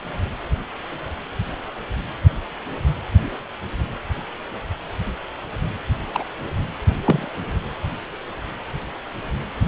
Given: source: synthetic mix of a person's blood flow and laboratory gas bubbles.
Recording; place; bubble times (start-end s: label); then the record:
Doppler ultrasound of blood flow; precordium
6.13-6.25 s: bubbles
7.04-7.28 s: bubbles
From the record:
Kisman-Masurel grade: 122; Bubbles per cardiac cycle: 1 to 2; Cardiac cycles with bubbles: 10 to 50%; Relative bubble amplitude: moderate (0.250 to 0.450); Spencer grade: 2 (many but less than half of the cardiac periods contain bubble signals, singularly or in groups); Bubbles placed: anywhere in the cardiac cycle